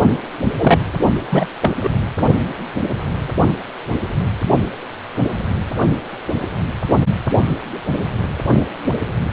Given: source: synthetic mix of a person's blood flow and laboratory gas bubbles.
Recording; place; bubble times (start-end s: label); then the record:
Doppler ultrasound of blood flow; precordium
0.57-0.77 s: bubbles
1.32-1.48 s: bubbles
1.61-1.73 s: bubbles
1.83-1.90 s: bubbles
From the record:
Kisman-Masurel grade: 213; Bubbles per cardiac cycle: several, 3 to 8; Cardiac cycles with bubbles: 1 to 10%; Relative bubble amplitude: loud (0.450 to 0.775); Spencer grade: 1 (occasional bubble signal discernible with the cardiac motion signal, with majority of cardiac periods free of bubbles); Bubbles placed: only in the low amplitude regions of the cardiac cycle